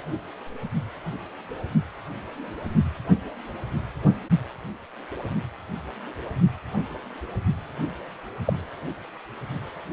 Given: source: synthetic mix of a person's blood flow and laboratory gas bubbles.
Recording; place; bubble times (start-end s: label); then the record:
Doppler ultrasound of blood flow; precordium
8.45-8.53 s: bubbles
From the record:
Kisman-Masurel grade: 122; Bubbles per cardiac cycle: 1 to 2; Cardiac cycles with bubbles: 10 to 50%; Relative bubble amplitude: moderate (0.250 to 0.450); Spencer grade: 2 (many but less than half of the cardiac periods contain bubble signals, singularly or in groups); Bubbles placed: only in the low amplitude regions of the cardiac cycle